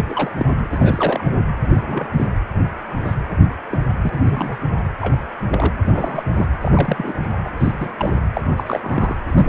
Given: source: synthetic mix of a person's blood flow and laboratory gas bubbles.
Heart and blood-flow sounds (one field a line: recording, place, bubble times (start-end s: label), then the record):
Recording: Doppler ultrasound of blood flow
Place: precordium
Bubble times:
0.00-0.03 s: bubbles
0.09-0.31 s: bubbles
0.37-0.57 s: bubbles
0.72-1.23 s: bubbles
1.64-2.13 s: bubbles
2.16-2.26 s: bubbles
3.03-3.14 s: bubbles
3.69-3.78 s: bubbles
4.02-4.10 s: bubbles
4.13-4.57 s: bubbles
5.01-5.17 s: bubbles
5.50-5.74 s: bubbles
5.85-6.24 s: bubbles
6.37-6.46 s: bubbles
6.61-6.71 s: bubbles
6.74-7.39 s: bubbles
7.45-7.50 s: bubbles
7.58-7.93 s: bubbles
7.97-8.13 s: bubbles
8.33-8.41 s: bubbles
8.56-8.80 s: bubbles
8.82-9.16 s: bubbles
9.25-9.49 s: bubbles
From the record:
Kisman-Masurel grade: 242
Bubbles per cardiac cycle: several, 3 to 8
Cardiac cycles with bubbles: 100%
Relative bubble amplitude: moderate (0.250 to 0.450)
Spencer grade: 3 (all of the cardiac periods contain showers or single bubble signals, but not dominating or overriding the cardiac motion signals)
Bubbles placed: anywhere in the cardiac cycle